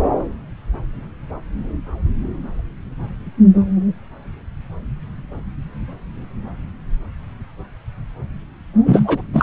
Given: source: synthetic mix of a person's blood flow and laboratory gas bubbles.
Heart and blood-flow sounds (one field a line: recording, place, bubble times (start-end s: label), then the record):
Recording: Doppler ultrasound of blood flow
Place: subclavian vein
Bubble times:
8.86-9.21 s: bubbles
9.33-9.43 s: bubbles
From the record:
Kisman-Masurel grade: 213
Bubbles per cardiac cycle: several, 3 to 8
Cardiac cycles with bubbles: 1 to 10%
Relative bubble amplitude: loud (0.450 to 0.775)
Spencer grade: 1 (occasional bubble signal discernible with the cardiac motion signal, with majority of cardiac periods free of bubbles)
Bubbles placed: anywhere in the cardiac cycle